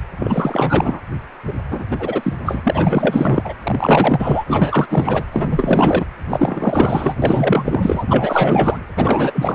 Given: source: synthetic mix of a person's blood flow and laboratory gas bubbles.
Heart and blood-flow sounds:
Doppler ultrasound of blood flow; precordium
0.19-1.01 s: bubbles
1.47-1.53 s: bubbles
1.70-1.86 s: bubbles
1.91-2.33 s: bubbles
2.45-3.53 s: bubbles
3.63-4.44 s: bubbles
4.47-5.26 s: bubbles
5.31-6.05 s: bubbles
6.28-7.16 s: bubbles
7.22-8.04 s: bubbles
8.08-8.77 s: bubbles
8.96-9.55 s: bubbles
From the record:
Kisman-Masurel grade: 444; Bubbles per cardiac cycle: continuous sound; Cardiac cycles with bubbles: 100%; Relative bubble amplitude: maximal (0.775 to 0.999); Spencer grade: 4 (maximum detectable bubble signal sounding continuously throughout systole and diastole of every cardiac period, and overriding the amplitude of the normal cardiac signals); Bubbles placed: anywhere in the cardiac cycle

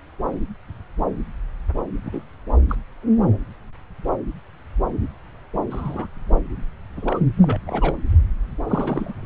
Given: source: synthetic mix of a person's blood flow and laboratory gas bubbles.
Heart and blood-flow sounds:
Doppler ultrasound of blood flow; subclavian vein
2.05-2.24 s: bubbles
2.68-2.75 s: bubbles
5.70-6.07 s: bubbles
6.96-7.20 s: bubbles
7.42-7.59 s: bubbles
7.67-7.97 s: bubbles
8.67-9.13 s: bubbles
9.23-9.26 s: bubbles
From the record:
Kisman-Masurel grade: 221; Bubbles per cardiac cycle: several, 3 to 8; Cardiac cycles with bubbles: 10 to 50%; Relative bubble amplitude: barely perceptible (0.100 to 0.250); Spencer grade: 2 (many but less than half of the cardiac periods contain bubble signals, singularly or in groups); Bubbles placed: anywhere in the cardiac cycle

